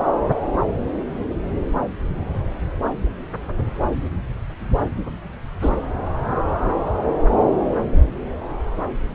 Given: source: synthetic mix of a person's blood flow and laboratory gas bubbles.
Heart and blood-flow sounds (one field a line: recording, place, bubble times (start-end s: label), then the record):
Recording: Doppler ultrasound of blood flow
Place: subclavian vein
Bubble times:
5.62-5.70 s: bubbles
From the record:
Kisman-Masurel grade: 113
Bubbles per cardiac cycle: 1 to 2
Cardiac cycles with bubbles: 1 to 10%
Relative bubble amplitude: loud (0.450 to 0.775)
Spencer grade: 1 (occasional bubble signal discernible with the cardiac motion signal, with majority of cardiac periods free of bubbles)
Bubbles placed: anywhere in the cardiac cycle